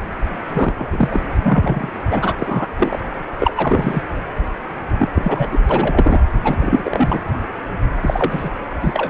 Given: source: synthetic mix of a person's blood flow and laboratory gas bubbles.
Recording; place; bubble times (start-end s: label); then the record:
Doppler ultrasound of blood flow; precordium
0.00-0.03 s: bubbles
0.47-0.74 s: bubbles
0.78-1.07 s: bubbles
1.11-1.21 s: bubbles
1.43-1.90 s: bubbles
2.09-2.33 s: bubbles
2.40-2.67 s: bubbles
2.78-2.99 s: bubbles
3.39-3.53 s: bubbles
3.56-4.01 s: bubbles
4.98-5.09 s: bubbles
5.15-5.47 s: bubbles
5.52-5.59 s: bubbles
5.69-6.20 s: bubbles
6.44-7.29 s: bubbles
8.02-8.49 s: bubbles
8.80-9.10 s: bubbles
From the record:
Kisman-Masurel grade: 233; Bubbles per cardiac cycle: several, 3 to 8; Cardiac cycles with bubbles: 50 to 99%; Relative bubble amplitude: loud (0.450 to 0.775); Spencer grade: 3 (all of the cardiac periods contain showers or single bubble signals, but not dominating or overriding the cardiac motion signals); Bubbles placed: anywhere in the cardiac cycle